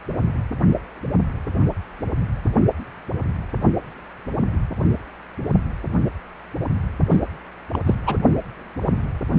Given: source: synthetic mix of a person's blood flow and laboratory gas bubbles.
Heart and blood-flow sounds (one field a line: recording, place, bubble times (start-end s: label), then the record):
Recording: Doppler ultrasound of blood flow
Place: precordium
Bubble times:
7.11-7.19 s: bubbles
7.73-7.79 s: bubbles
7.86-7.95 s: bubbles
8.05-8.17 s: bubbles
From the record:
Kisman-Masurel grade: 212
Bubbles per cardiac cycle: several, 3 to 8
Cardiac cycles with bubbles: 1 to 10%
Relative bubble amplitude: moderate (0.250 to 0.450)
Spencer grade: 1 (occasional bubble signal discernible with the cardiac motion signal, with majority of cardiac periods free of bubbles)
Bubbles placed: only in the low amplitude regions of the cardiac cycle